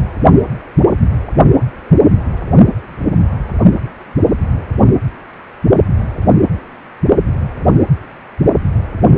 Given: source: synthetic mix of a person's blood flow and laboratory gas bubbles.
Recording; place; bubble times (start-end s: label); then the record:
Doppler ultrasound of blood flow; precordium
no bubbles
From the record:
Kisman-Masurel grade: 000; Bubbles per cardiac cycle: 0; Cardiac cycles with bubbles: 0%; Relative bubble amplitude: no bubbles discernible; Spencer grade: 0 (complete lack of bubble signals)